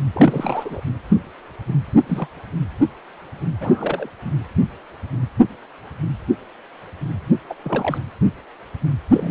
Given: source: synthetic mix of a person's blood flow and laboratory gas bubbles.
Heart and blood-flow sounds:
Doppler ultrasound of blood flow; precordium
0.13-0.81 s: bubbles
2.07-2.27 s: bubbles
3.60-4.09 s: bubbles
4.25-4.32 s: bubbles
7.50-7.54 s: bubbles
7.64-7.98 s: bubbles
9.13-9.31 s: bubbles
From the record:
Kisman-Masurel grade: 232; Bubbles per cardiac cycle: several, 3 to 8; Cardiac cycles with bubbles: 50 to 99%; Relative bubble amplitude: moderate (0.250 to 0.450); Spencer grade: 3 (all of the cardiac periods contain showers or single bubble signals, but not dominating or overriding the cardiac motion signals); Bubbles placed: anywhere in the cardiac cycle

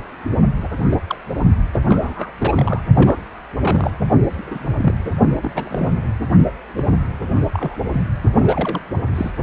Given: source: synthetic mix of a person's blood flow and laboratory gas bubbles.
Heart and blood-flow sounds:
Doppler ultrasound of blood flow; precordium
0.60-0.68 s: bubbles
0.89-1.02 s: bubbles
1.07-1.17 s: bubbles
1.73-1.79 s: bubbles
1.88-2.31 s: bubbles
2.40-2.80 s: bubbles
2.95-3.17 s: bubbles
3.60-3.91 s: bubbles
4.46-4.73 s: bubbles
4.77-4.94 s: bubbles
5.04-5.12 s: bubbles
5.41-6.02 s: bubbles
6.76-6.85 s: bubbles
7.53-7.75 s: bubbles
7.89-8.04 s: bubbles
8.39-8.80 s: bubbles
9.15-9.31 s: bubbles
From the record:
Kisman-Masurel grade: 242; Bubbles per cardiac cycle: several, 3 to 8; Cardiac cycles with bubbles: 100%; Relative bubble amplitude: moderate (0.250 to 0.450); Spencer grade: 3 (all of the cardiac periods contain showers or single bubble signals, but not dominating or overriding the cardiac motion signals); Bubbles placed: only in the low amplitude regions of the cardiac cycle

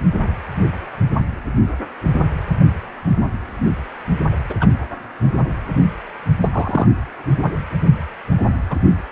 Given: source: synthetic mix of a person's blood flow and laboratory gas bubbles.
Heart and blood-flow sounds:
Doppler ultrasound of blood flow; precordium
4.50-4.54 s: bubbles
4.60-4.67 s: bubbles
6.40-6.48 s: bubbles
6.52-6.88 s: bubbles
8.70-8.76 s: bubbles
From the record:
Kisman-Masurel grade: 123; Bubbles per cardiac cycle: 1 to 2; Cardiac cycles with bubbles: 10 to 50%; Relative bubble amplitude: loud (0.450 to 0.775); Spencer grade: 2 (many but less than half of the cardiac periods contain bubble signals, singularly or in groups); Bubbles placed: anywhere in the cardiac cycle

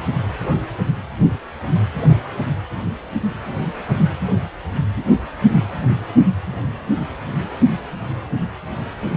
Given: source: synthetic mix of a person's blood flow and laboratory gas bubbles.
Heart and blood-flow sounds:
Doppler ultrasound of blood flow; precordium
no bubbles
From the record:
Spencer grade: 0 (complete lack of bubble signals)

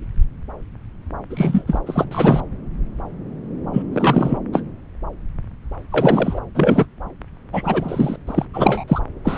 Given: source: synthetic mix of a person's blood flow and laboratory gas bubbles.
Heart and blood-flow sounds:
Doppler ultrasound of blood flow; subclavian vein
1.30-1.79 s: bubbles
1.86-2.05 s: bubbles
2.11-2.41 s: bubbles
3.73-3.82 s: bubbles
3.93-4.38 s: bubbles
4.52-4.61 s: bubbles
5.90-6.39 s: bubbles
6.54-6.85 s: bubbles
7.52-8.16 s: bubbles
8.27-8.46 s: bubbles
8.53-8.84 s: bubbles
8.88-9.00 s: bubbles
9.24-9.38 s: bubbles
From the record:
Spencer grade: 3 (all of the cardiac periods contain showers or single bubble signals, but not dominating or overriding the cardiac motion signals); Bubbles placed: anywhere in the cardiac cycle

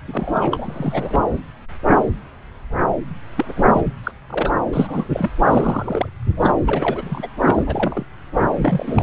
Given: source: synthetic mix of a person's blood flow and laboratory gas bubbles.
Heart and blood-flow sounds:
Doppler ultrasound of blood flow; subclavian vein
0.08-1.20 s: bubbles
3.37-3.53 s: bubbles
3.56-3.64 s: bubbles
3.73-3.81 s: bubbles
3.85-3.91 s: bubbles
4.04-4.12 s: bubbles
4.29-4.51 s: bubbles
4.72-5.09 s: bubbles
5.13-5.30 s: bubbles
5.46-6.07 s: bubbles
6.40-6.52 s: bubbles
6.66-7.27 s: bubbles
7.45-8.06 s: bubbles
8.55-9.03 s: bubbles
From the record:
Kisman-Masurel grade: 332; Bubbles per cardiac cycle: rolling drumbeat, 9 or more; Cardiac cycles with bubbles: 50 to 99%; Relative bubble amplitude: moderate (0.250 to 0.450); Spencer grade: 3 (all of the cardiac periods contain showers or single bubble signals, but not dominating or overriding the cardiac motion signals); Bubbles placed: anywhere in the cardiac cycle

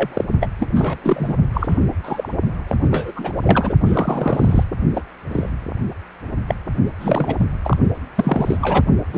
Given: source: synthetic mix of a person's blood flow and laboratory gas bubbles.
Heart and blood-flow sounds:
Doppler ultrasound of blood flow; precordium
0.00-0.25 s: bubbles
0.40-0.49 s: bubbles
0.58-0.99 s: bubbles
1.03-1.36 s: bubbles
1.54-1.79 s: bubbles
2.03-2.29 s: bubbles
2.67-2.75 s: bubbles
2.84-3.12 s: bubbles
3.16-3.32 s: bubbles
3.41-3.73 s: bubbles
3.85-4.64 s: bubbles
4.94-5.04 s: bubbles
5.31-5.49 s: bubbles
6.48-6.55 s: bubbles
7.00-7.45 s: bubbles
7.63-7.77 s: bubbles
8.16-8.57 s: bubbles
8.61-8.84 s: bubbles
9.13-9.18 s: bubbles
From the record:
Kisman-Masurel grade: 243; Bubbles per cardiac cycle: several, 3 to 8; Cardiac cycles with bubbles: 100%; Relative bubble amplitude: loud (0.450 to 0.775); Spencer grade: 3 (all of the cardiac periods contain showers or single bubble signals, but not dominating or overriding the cardiac motion signals); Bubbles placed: only in the low amplitude regions of the cardiac cycle

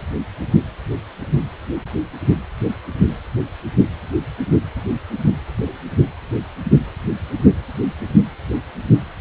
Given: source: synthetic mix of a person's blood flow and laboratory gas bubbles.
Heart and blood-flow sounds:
Doppler ultrasound of blood flow; precordium
no bubbles
From the record:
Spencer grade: 0 (complete lack of bubble signals)

